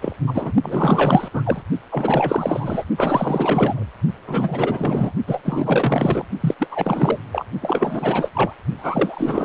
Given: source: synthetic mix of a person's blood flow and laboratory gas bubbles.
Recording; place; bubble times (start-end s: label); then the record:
Doppler ultrasound of blood flow; precordium
0.01-0.14 s: bubbles
0.27-0.52 s: bubbles
0.62-1.28 s: bubbles
1.33-1.62 s: bubbles
1.91-2.85 s: bubbles
2.97-3.84 s: bubbles
4.27-5.12 s: bubbles
5.26-6.25 s: bubbles
6.40-6.54 s: bubbles
6.59-6.68 s: bubbles
6.71-7.19 s: bubbles
7.32-7.46 s: bubbles
7.61-8.30 s: bubbles
8.33-8.55 s: bubbles
8.77-9.45 s: bubbles
From the record:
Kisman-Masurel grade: 444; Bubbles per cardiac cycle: continuous sound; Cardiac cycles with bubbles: 100%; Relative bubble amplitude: maximal (0.775 to 0.999); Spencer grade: 4 (maximum detectable bubble signal sounding continuously throughout systole and diastole of every cardiac period, and overriding the amplitude of the normal cardiac signals); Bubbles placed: only in the low amplitude regions of the cardiac cycle